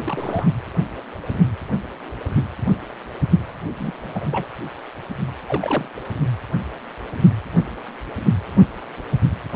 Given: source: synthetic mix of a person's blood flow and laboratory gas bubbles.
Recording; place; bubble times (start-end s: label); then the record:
Doppler ultrasound of blood flow; precordium
0.00-0.47 s: bubbles
3.71-4.46 s: bubbles
5.47-5.88 s: bubbles
From the record:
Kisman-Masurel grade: 222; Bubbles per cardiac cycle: several, 3 to 8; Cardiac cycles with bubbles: 10 to 50%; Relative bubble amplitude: moderate (0.250 to 0.450); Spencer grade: 2 (many but less than half of the cardiac periods contain bubble signals, singularly or in groups); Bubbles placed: anywhere in the cardiac cycle